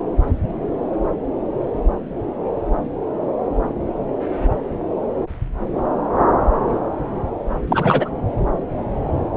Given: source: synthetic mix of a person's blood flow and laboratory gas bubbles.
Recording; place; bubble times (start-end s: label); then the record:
Doppler ultrasound of blood flow; subclavian vein
7.67-8.10 s: bubbles
From the record:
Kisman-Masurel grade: 113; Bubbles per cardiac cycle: 1 to 2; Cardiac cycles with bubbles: 1 to 10%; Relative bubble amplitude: loud (0.450 to 0.775); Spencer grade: 1 (occasional bubble signal discernible with the cardiac motion signal, with majority of cardiac periods free of bubbles); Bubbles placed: anywhere in the cardiac cycle